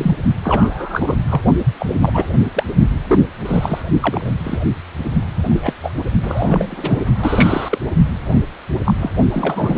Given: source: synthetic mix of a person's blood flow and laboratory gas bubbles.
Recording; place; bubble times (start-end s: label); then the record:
Doppler ultrasound of blood flow; precordium
0.00-0.15 s: bubbles
0.44-1.16 s: bubbles
1.30-1.41 s: bubbles
1.79-1.86 s: bubbles
2.02-2.26 s: bubbles
2.55-2.64 s: bubbles
3.08-3.19 s: bubbles
3.45-3.82 s: bubbles
4.01-4.29 s: bubbles
4.44-4.58 s: bubbles
5.03-5.10 s: bubbles
5.49-5.73 s: bubbles
5.83-5.90 s: bubbles
6.23-6.67 s: bubbles
6.70-7.06 s: bubbles
7.21-7.79 s: bubbles
8.34-8.39 s: bubbles
8.86-8.94 s: bubbles
9.01-9.11 s: bubbles
9.32-9.78 s: bubbles
From the record:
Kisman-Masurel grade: 242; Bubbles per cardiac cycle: several, 3 to 8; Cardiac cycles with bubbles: 100%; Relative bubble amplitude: moderate (0.250 to 0.450); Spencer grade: 3 (all of the cardiac periods contain showers or single bubble signals, but not dominating or overriding the cardiac motion signals); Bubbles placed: only in the low amplitude regions of the cardiac cycle